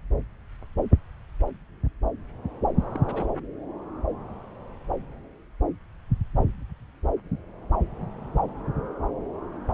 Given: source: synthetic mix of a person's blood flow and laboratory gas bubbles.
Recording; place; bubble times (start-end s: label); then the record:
Doppler ultrasound of blood flow; subclavian vein
2.93-3.00 s: bubbles
3.06-3.26 s: bubbles
From the record:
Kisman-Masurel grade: 211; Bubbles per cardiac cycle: several, 3 to 8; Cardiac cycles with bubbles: 1 to 10%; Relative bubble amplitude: barely perceptible (0.100 to 0.250); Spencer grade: 1 (occasional bubble signal discernible with the cardiac motion signal, with majority of cardiac periods free of bubbles); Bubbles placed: anywhere in the cardiac cycle